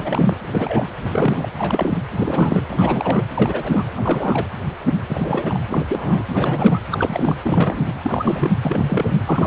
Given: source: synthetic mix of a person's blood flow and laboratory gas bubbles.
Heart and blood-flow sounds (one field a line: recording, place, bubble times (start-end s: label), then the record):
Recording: Doppler ultrasound of blood flow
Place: precordium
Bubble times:
0.00-0.36 s: bubbles
0.42-0.89 s: bubbles
1.00-1.49 s: bubbles
1.57-1.99 s: bubbles
2.10-2.62 s: bubbles
2.70-3.26 s: bubbles
3.35-3.83 s: bubbles
3.94-4.46 s: bubbles
5.09-5.59 s: bubbles
5.70-5.85 s: bubbles
5.88-6.24 s: bubbles
6.29-6.79 s: bubbles
6.91-7.37 s: bubbles
7.45-7.92 s: bubbles
8.02-8.51 s: bubbles
8.62-9.20 s: bubbles
9.26-9.47 s: bubbles
From the record:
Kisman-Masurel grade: 332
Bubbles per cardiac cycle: rolling drumbeat, 9 or more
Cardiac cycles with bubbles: 50 to 99%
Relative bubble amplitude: moderate (0.250 to 0.450)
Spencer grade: 3 (all of the cardiac periods contain showers or single bubble signals, but not dominating or overriding the cardiac motion signals)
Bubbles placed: anywhere in the cardiac cycle